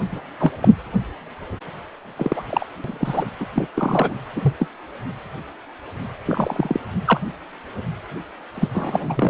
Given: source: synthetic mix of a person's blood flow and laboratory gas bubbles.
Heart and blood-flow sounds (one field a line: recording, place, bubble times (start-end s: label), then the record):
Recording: Doppler ultrasound of blood flow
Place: precordium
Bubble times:
0.12-0.20 s: bubbles
0.39-0.51 s: bubbles
0.61-0.69 s: bubbles
2.16-2.43 s: bubbles
2.50-2.66 s: bubbles
2.84-3.26 s: bubbles
3.40-3.46 s: bubbles
3.54-3.67 s: bubbles
3.75-4.14 s: bubbles
4.36-4.54 s: bubbles
4.59-4.67 s: bubbles
6.26-6.80 s: bubbles
7.05-7.21 s: bubbles
8.54-8.68 s: bubbles
8.74-9.30 s: bubbles
From the record:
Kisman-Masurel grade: 233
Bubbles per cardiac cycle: several, 3 to 8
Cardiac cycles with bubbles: 50 to 99%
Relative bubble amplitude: loud (0.450 to 0.775)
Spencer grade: 3 (all of the cardiac periods contain showers or single bubble signals, but not dominating or overriding the cardiac motion signals)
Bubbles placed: anywhere in the cardiac cycle